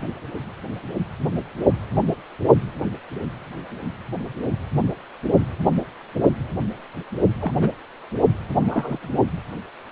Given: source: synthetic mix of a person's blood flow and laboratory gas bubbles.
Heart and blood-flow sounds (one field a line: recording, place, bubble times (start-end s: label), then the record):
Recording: Doppler ultrasound of blood flow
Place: precordium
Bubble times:
7.41-7.52 s: bubbles
7.55-7.70 s: bubbles
8.58-9.10 s: bubbles
From the record:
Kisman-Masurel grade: 122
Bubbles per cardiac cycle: 1 to 2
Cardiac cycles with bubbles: 10 to 50%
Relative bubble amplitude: moderate (0.250 to 0.450)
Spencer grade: 2 (many but less than half of the cardiac periods contain bubble signals, singularly or in groups)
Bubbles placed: only in the low amplitude regions of the cardiac cycle